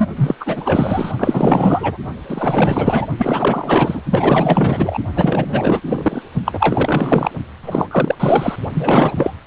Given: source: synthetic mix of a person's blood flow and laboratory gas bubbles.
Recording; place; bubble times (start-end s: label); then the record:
Doppler ultrasound of blood flow; precordium
0.00-0.07 s: bubbles
0.16-0.35 s: bubbles
0.40-1.12 s: bubbles
1.19-1.97 s: bubbles
2.27-3.06 s: bubbles
3.18-4.02 s: bubbles
4.10-5.00 s: bubbles
5.15-5.81 s: bubbles
5.85-6.22 s: bubbles
6.45-7.31 s: bubbles
7.62-7.88 s: bubbles
7.91-8.15 s: bubbles
8.20-8.56 s: bubbles
8.75-9.34 s: bubbles
From the record:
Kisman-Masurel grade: 444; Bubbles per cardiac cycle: continuous sound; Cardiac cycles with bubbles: 100%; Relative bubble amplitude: maximal (0.775 to 0.999); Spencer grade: 4 (maximum detectable bubble signal sounding continuously throughout systole and diastole of every cardiac period, and overriding the amplitude of the normal cardiac signals); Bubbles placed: only in the low amplitude regions of the cardiac cycle